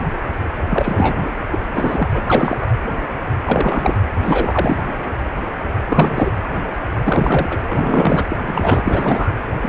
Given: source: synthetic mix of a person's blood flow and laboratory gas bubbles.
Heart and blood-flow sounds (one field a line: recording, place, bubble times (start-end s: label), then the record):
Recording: Doppler ultrasound of blood flow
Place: precordium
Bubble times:
0.69-1.18 s: bubbles
1.47-1.62 s: bubbles
1.74-2.10 s: bubbles
2.13-2.21 s: bubbles
2.26-2.57 s: bubbles
2.62-2.66 s: bubbles
3.44-4.02 s: bubbles
4.15-4.80 s: bubbles
5.88-6.32 s: bubbles
7.03-7.59 s: bubbles
7.68-8.26 s: bubbles
8.29-8.36 s: bubbles
8.46-9.30 s: bubbles
9.62-9.69 s: bubbles
From the record:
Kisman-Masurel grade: 333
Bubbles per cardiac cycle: rolling drumbeat, 9 or more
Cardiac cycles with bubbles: 50 to 99%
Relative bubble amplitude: loud (0.450 to 0.775)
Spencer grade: 3 (all of the cardiac periods contain showers or single bubble signals, but not dominating or overriding the cardiac motion signals)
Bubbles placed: anywhere in the cardiac cycle